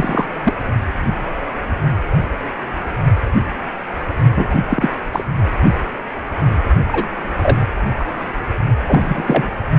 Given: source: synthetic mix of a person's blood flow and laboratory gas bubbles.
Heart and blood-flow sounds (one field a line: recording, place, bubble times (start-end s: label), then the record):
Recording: Doppler ultrasound of blood flow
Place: precordium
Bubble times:
0.00-0.25 s: bubbles
0.44-0.54 s: bubbles
4.36-4.46 s: bubbles
4.50-4.55 s: bubbles
4.69-4.90 s: bubbles
5.12-5.25 s: bubbles
6.88-7.10 s: bubbles
7.42-7.58 s: bubbles
8.00-8.05 s: bubbles
8.88-9.50 s: bubbles
From the record:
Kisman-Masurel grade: 233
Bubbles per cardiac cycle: several, 3 to 8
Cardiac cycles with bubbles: 50 to 99%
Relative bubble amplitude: loud (0.450 to 0.775)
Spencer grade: 3 (all of the cardiac periods contain showers or single bubble signals, but not dominating or overriding the cardiac motion signals)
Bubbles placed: only in the low amplitude regions of the cardiac cycle